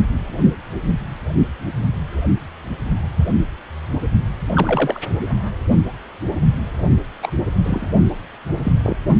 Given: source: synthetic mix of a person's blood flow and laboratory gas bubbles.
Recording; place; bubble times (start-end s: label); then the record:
Doppler ultrasound of blood flow; precordium
4.54-4.99 s: bubbles
7.21-7.32 s: bubbles
7.63-7.89 s: bubbles
8.64-8.72 s: bubbles
8.82-8.96 s: bubbles
From the record:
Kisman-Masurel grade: 122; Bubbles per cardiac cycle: 1 to 2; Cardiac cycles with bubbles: 10 to 50%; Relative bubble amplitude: moderate (0.250 to 0.450); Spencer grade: 2 (many but less than half of the cardiac periods contain bubble signals, singularly or in groups); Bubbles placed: only in the low amplitude regions of the cardiac cycle